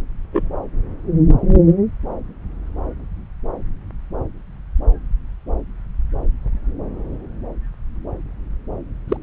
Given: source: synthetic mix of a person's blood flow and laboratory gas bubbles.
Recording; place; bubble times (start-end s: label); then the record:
Doppler ultrasound of blood flow; subclavian vein
0.32-0.50 s: bubbles
9.08-9.17 s: bubbles
From the record:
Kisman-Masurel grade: 122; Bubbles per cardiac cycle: 1 to 2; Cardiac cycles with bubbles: 10 to 50%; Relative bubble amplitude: moderate (0.250 to 0.450); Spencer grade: 2 (many but less than half of the cardiac periods contain bubble signals, singularly or in groups); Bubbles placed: anywhere in the cardiac cycle